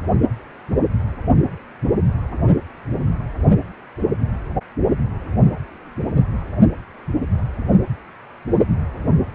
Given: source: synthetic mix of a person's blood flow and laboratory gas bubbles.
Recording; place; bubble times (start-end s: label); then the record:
Doppler ultrasound of blood flow; precordium
no bubbles
From the record:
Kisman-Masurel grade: 000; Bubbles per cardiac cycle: 0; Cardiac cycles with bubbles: 0%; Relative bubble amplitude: no bubbles discernible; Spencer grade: 0 (complete lack of bubble signals)